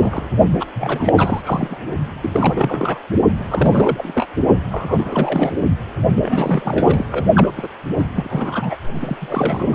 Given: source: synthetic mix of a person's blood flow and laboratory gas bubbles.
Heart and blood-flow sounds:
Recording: Doppler ultrasound of blood flow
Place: precordium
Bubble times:
0.00-0.23 s: bubbles
0.60-0.66 s: bubbles
0.74-1.77 s: bubbles
2.21-2.98 s: bubbles
3.34-4.27 s: bubbles
4.71-5.61 s: bubbles
6.15-7.05 s: bubbles
7.12-7.25 s: bubbles
7.34-7.52 s: bubbles
7.56-7.68 s: bubbles
7.97-8.04 s: bubbles
8.16-8.76 s: bubbles
8.94-9.16 s: bubbles
9.21-9.75 s: bubbles
From the record:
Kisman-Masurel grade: 342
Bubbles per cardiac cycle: rolling drumbeat, 9 or more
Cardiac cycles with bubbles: 100%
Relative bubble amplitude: moderate (0.250 to 0.450)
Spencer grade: 3 (all of the cardiac periods contain showers or single bubble signals, but not dominating or overriding the cardiac motion signals)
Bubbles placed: only in the low amplitude regions of the cardiac cycle

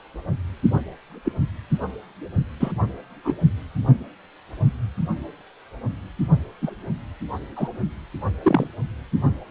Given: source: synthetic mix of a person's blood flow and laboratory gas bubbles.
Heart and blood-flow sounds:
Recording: Doppler ultrasound of blood flow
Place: precordium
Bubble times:
1.25-1.32 s: bubbles
2.60-2.72 s: bubbles
3.24-3.35 s: bubbles
6.62-6.71 s: bubbles
7.56-7.69 s: bubbles
8.42-8.67 s: bubbles
From the record:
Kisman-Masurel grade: 122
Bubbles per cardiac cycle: 1 to 2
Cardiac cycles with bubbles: 10 to 50%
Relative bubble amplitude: moderate (0.250 to 0.450)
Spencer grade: 2 (many but less than half of the cardiac periods contain bubble signals, singularly or in groups)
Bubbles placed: only in the low amplitude regions of the cardiac cycle

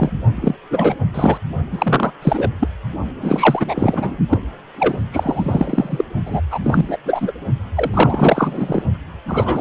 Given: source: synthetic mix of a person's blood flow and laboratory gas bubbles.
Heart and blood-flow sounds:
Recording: Doppler ultrasound of blood flow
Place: precordium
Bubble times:
0.00-0.10 s: bubbles
0.36-0.55 s: bubbles
0.71-0.96 s: bubbles
1.14-1.38 s: bubbles
1.72-2.11 s: bubbles
2.22-2.50 s: bubbles
2.59-2.67 s: bubbles
3.21-4.18 s: bubbles
4.29-4.39 s: bubbles
4.74-5.04 s: bubbles
5.12-6.04 s: bubbles
6.25-6.41 s: bubbles
6.50-6.60 s: bubbles
6.62-6.98 s: bubbles
7.04-7.32 s: bubbles
7.73-8.83 s: bubbles
9.28-9.61 s: bubbles
From the record:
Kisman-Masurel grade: 343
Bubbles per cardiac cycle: rolling drumbeat, 9 or more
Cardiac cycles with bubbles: 100%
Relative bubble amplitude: loud (0.450 to 0.775)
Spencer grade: 3 (all of the cardiac periods contain showers or single bubble signals, but not dominating or overriding the cardiac motion signals)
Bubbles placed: only in the low amplitude regions of the cardiac cycle

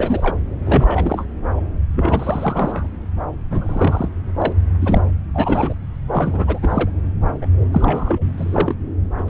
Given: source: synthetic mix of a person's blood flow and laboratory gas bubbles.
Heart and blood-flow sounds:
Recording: Doppler ultrasound of blood flow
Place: subclavian vein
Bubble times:
0.00-0.37 s: bubbles
0.65-1.25 s: bubbles
1.44-1.60 s: bubbles
1.93-2.88 s: bubbles
3.50-4.08 s: bubbles
4.38-4.55 s: bubbles
4.79-5.02 s: bubbles
5.33-5.74 s: bubbles
6.11-6.59 s: bubbles
6.62-6.90 s: bubbles
7.41-7.48 s: bubbles
7.72-8.33 s: bubbles
8.38-8.76 s: bubbles
9.18-9.23 s: bubbles
9.27-9.30 s: bubbles
From the record:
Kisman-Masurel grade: 342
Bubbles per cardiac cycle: rolling drumbeat, 9 or more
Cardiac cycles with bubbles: 100%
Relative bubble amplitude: moderate (0.250 to 0.450)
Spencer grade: 3 (all of the cardiac periods contain showers or single bubble signals, but not dominating or overriding the cardiac motion signals)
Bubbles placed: anywhere in the cardiac cycle

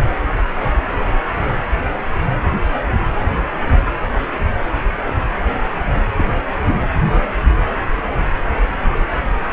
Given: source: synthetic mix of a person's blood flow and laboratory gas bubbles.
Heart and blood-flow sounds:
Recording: Doppler ultrasound of blood flow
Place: precordium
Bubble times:
6.14-6.41 s: bubbles
6.65-6.75 s: bubbles
From the record:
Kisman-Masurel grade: 112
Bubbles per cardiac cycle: 1 to 2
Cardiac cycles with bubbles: 1 to 10%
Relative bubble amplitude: moderate (0.250 to 0.450)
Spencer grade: 1 (occasional bubble signal discernible with the cardiac motion signal, with majority of cardiac periods free of bubbles)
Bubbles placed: anywhere in the cardiac cycle

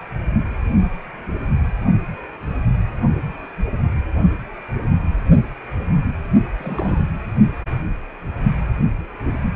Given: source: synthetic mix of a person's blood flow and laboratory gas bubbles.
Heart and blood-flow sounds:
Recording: Doppler ultrasound of blood flow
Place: precordium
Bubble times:
6.58-7.07 s: bubbles
From the record:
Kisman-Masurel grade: 211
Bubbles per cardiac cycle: several, 3 to 8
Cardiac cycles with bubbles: 1 to 10%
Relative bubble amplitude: barely perceptible (0.100 to 0.250)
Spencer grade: 1 (occasional bubble signal discernible with the cardiac motion signal, with majority of cardiac periods free of bubbles)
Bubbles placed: only in the low amplitude regions of the cardiac cycle

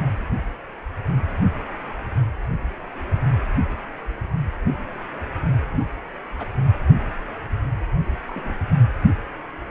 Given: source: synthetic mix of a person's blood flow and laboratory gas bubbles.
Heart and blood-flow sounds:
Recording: Doppler ultrasound of blood flow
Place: precordium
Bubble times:
5.71-5.83 s: bubbles
6.38-6.46 s: bubbles
8.27-8.54 s: bubbles
From the record:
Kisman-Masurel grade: 121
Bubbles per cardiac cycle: 1 to 2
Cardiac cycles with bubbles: 10 to 50%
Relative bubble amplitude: barely perceptible (0.100 to 0.250)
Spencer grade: 2 (many but less than half of the cardiac periods contain bubble signals, singularly or in groups)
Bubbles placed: anywhere in the cardiac cycle

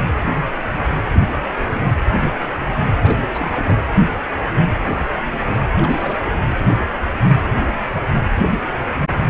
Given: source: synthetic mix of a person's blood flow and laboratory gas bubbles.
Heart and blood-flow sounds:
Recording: Doppler ultrasound of blood flow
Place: precordium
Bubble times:
1.12-1.42 s: bubbles
1.54-1.69 s: bubbles
1.74-1.88 s: bubbles
2.16-2.34 s: bubbles
2.59-2.65 s: bubbles
2.73-2.89 s: bubbles
3.02-3.23 s: bubbles
3.29-3.78 s: bubbles
5.78-6.39 s: bubbles
From the record:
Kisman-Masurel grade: 221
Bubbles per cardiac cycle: several, 3 to 8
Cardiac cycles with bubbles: 10 to 50%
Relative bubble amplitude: barely perceptible (0.100 to 0.250)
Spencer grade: 2 (many but less than half of the cardiac periods contain bubble signals, singularly or in groups)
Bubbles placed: anywhere in the cardiac cycle

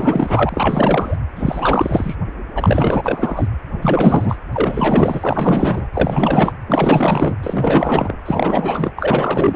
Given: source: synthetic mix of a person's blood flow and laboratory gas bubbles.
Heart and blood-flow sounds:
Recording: Doppler ultrasound of blood flow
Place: precordium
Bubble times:
0.00-1.16 s: bubbles
1.36-2.15 s: bubbles
2.55-3.48 s: bubbles
3.71-4.38 s: bubbles
4.53-5.88 s: bubbles
5.94-6.53 s: bubbles
6.68-7.36 s: bubbles
7.42-8.18 s: bubbles
8.25-8.92 s: bubbles
8.97-9.56 s: bubbles
From the record:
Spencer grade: 4 (maximum detectable bubble signal sounding continuously throughout systole and diastole of every cardiac period, and overriding the amplitude of the normal cardiac signals)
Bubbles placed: anywhere in the cardiac cycle

